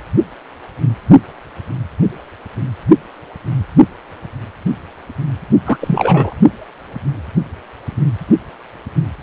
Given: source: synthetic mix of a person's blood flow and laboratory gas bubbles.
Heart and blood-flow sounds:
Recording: Doppler ultrasound of blood flow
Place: precordium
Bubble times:
5.65-6.34 s: bubbles
From the record:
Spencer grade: 1 (occasional bubble signal discernible with the cardiac motion signal, with majority of cardiac periods free of bubbles)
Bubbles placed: only in the low amplitude regions of the cardiac cycle

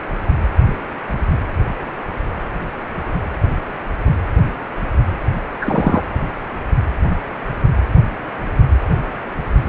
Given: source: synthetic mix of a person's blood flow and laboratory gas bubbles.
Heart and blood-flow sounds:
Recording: Doppler ultrasound of blood flow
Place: precordium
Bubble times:
5.62-6.02 s: bubbles
From the record:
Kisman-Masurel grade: 113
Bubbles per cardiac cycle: 1 to 2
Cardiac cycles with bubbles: 1 to 10%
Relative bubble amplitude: loud (0.450 to 0.775)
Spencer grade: 1 (occasional bubble signal discernible with the cardiac motion signal, with majority of cardiac periods free of bubbles)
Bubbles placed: anywhere in the cardiac cycle

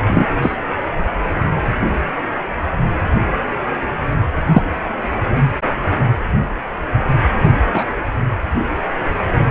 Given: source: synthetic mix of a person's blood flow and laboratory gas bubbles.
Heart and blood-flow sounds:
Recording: Doppler ultrasound of blood flow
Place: precordium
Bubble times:
0.09-0.26 s: bubbles
0.41-0.56 s: bubbles
4.46-4.62 s: bubbles
7.74-7.83 s: bubbles
From the record:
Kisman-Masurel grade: 123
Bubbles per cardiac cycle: 1 to 2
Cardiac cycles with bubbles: 10 to 50%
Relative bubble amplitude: loud (0.450 to 0.775)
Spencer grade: 2 (many but less than half of the cardiac periods contain bubble signals, singularly or in groups)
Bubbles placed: anywhere in the cardiac cycle

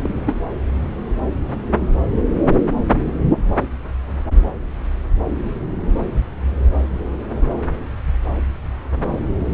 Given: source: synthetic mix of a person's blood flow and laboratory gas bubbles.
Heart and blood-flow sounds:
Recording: Doppler ultrasound of blood flow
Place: subclavian vein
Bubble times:
0.00-0.41 s: bubbles
From the record:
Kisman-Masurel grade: 211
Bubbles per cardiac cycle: several, 3 to 8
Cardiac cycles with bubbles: 1 to 10%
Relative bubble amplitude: barely perceptible (0.100 to 0.250)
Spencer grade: 1 (occasional bubble signal discernible with the cardiac motion signal, with majority of cardiac periods free of bubbles)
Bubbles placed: anywhere in the cardiac cycle

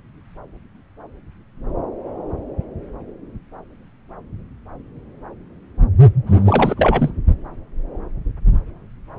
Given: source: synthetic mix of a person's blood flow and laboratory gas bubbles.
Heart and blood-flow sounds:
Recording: Doppler ultrasound of blood flow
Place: subclavian vein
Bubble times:
6.26-7.11 s: bubbles
From the record:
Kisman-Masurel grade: 212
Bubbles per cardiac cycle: several, 3 to 8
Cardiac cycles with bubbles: 1 to 10%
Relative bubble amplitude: moderate (0.250 to 0.450)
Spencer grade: 1 (occasional bubble signal discernible with the cardiac motion signal, with majority of cardiac periods free of bubbles)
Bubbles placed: anywhere in the cardiac cycle

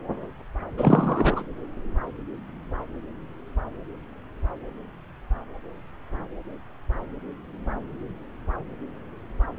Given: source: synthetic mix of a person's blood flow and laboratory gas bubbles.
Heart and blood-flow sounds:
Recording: Doppler ultrasound of blood flow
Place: subclavian vein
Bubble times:
0.78-1.43 s: bubbles
From the record:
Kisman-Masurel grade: 212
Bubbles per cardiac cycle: several, 3 to 8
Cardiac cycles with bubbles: 1 to 10%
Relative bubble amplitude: moderate (0.250 to 0.450)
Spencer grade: 1 (occasional bubble signal discernible with the cardiac motion signal, with majority of cardiac periods free of bubbles)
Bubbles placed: anywhere in the cardiac cycle

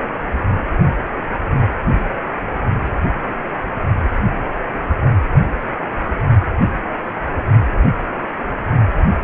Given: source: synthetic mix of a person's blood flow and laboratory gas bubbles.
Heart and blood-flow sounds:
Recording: Doppler ultrasound of blood flow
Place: precordium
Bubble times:
no bubbles
From the record:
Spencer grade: 0 (complete lack of bubble signals)

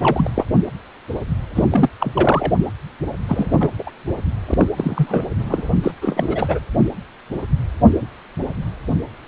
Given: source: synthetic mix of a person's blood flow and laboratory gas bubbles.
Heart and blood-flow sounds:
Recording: Doppler ultrasound of blood flow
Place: precordium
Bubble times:
0.00-0.30 s: bubbles
0.34-0.44 s: bubbles
1.54-1.65 s: bubbles
1.70-1.89 s: bubbles
2.01-2.52 s: bubbles
3.28-3.70 s: bubbles
3.79-3.83 s: bubbles
3.87-3.91 s: bubbles
4.48-4.54 s: bubbles
4.58-4.67 s: bubbles
4.76-5.25 s: bubbles
5.39-5.70 s: bubbles
5.82-5.92 s: bubbles
6.02-6.59 s: bubbles
From the record:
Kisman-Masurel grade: 332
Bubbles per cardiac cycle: rolling drumbeat, 9 or more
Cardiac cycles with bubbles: 50 to 99%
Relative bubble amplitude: moderate (0.250 to 0.450)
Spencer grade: 3 (all of the cardiac periods contain showers or single bubble signals, but not dominating or overriding the cardiac motion signals)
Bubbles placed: anywhere in the cardiac cycle

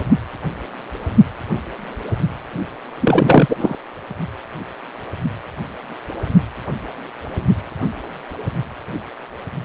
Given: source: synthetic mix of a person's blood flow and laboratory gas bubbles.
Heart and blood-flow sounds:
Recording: Doppler ultrasound of blood flow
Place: precordium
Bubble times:
3.01-3.57 s: bubbles
3.60-3.75 s: bubbles
From the record:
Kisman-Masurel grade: 213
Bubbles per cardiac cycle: several, 3 to 8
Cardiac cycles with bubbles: 1 to 10%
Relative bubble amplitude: loud (0.450 to 0.775)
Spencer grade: 1 (occasional bubble signal discernible with the cardiac motion signal, with majority of cardiac periods free of bubbles)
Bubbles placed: anywhere in the cardiac cycle

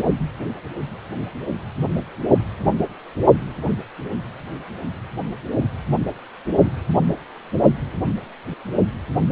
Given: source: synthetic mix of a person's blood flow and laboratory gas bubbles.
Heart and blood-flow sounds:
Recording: Doppler ultrasound of blood flow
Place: precordium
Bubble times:
3.69-3.77 s: bubbles
From the record:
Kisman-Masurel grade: 111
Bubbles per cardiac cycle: 1 to 2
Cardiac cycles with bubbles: 1 to 10%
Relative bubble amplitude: barely perceptible (0.100 to 0.250)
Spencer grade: 1 (occasional bubble signal discernible with the cardiac motion signal, with majority of cardiac periods free of bubbles)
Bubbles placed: only in the low amplitude regions of the cardiac cycle

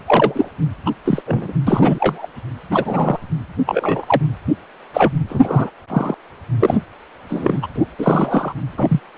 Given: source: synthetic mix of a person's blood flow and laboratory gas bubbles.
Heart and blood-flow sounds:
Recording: Doppler ultrasound of blood flow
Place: precordium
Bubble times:
0.05-0.49 s: bubbles
0.85-0.91 s: bubbles
1.04-1.22 s: bubbles
1.27-1.54 s: bubbles
1.67-2.27 s: bubbles
2.71-3.18 s: bubbles
3.66-4.21 s: bubbles
4.94-5.13 s: bubbles
5.29-5.71 s: bubbles
5.89-6.14 s: bubbles
6.59-6.78 s: bubbles
7.29-7.67 s: bubbles
7.75-7.84 s: bubbles
7.98-8.53 s: bubbles
8.77-9.00 s: bubbles
From the record:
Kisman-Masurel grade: 243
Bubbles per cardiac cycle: several, 3 to 8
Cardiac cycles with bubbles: 100%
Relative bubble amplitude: loud (0.450 to 0.775)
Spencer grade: 3 (all of the cardiac periods contain showers or single bubble signals, but not dominating or overriding the cardiac motion signals)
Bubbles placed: anywhere in the cardiac cycle

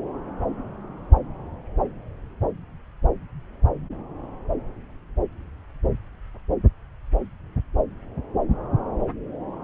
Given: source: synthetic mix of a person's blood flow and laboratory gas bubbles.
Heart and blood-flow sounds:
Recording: Doppler ultrasound of blood flow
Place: subclavian vein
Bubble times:
no bubbles
From the record:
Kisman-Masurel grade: 000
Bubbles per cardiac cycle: 0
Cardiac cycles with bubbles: 0%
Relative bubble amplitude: no bubbles discernible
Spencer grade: 0 (complete lack of bubble signals)

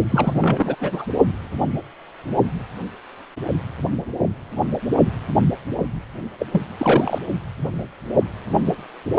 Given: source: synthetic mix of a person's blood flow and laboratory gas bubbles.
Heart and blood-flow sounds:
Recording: Doppler ultrasound of blood flow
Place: precordium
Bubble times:
0.10-0.76 s: bubbles
0.80-1.05 s: bubbles
6.39-6.46 s: bubbles
6.51-6.62 s: bubbles
6.78-7.19 s: bubbles
From the record:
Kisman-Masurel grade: 223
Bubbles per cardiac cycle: several, 3 to 8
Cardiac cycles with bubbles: 10 to 50%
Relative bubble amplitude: loud (0.450 to 0.775)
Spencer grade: 2 (many but less than half of the cardiac periods contain bubble signals, singularly or in groups)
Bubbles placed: only in the low amplitude regions of the cardiac cycle

